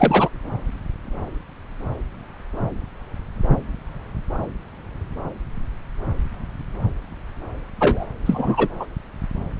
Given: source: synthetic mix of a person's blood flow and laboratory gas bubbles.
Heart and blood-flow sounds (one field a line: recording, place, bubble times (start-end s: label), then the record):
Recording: Doppler ultrasound of blood flow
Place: subclavian vein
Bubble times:
0.00-0.28 s: bubbles
7.80-8.05 s: bubbles
8.25-8.68 s: bubbles
8.79-8.86 s: bubbles
From the record:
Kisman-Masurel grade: 223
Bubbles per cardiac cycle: several, 3 to 8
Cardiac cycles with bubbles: 10 to 50%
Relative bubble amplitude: loud (0.450 to 0.775)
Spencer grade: 2 (many but less than half of the cardiac periods contain bubble signals, singularly or in groups)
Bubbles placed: anywhere in the cardiac cycle